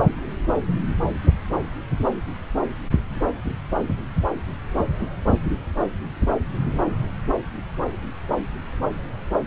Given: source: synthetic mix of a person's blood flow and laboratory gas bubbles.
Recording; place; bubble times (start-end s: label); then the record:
Doppler ultrasound of blood flow; subclavian vein
no bubbles
From the record:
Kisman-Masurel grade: 000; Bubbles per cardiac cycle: 0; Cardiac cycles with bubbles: 0%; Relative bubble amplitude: no bubbles discernible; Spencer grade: 0 (complete lack of bubble signals)